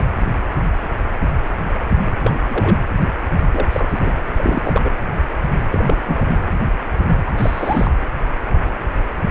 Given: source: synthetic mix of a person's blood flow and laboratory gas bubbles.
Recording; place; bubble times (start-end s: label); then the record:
Doppler ultrasound of blood flow; precordium
0.00-0.04 s: bubbles
2.23-2.31 s: bubbles
2.48-2.77 s: bubbles
3.50-3.67 s: bubbles
3.72-4.12 s: bubbles
4.38-4.90 s: bubbles
5.71-6.00 s: bubbles
6.06-6.28 s: bubbles
7.25-7.32 s: bubbles
7.37-7.93 s: bubbles
From the record:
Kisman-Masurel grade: 232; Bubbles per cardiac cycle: several, 3 to 8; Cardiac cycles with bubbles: 50 to 99%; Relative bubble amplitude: moderate (0.250 to 0.450); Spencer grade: 3 (all of the cardiac periods contain showers or single bubble signals, but not dominating or overriding the cardiac motion signals); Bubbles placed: anywhere in the cardiac cycle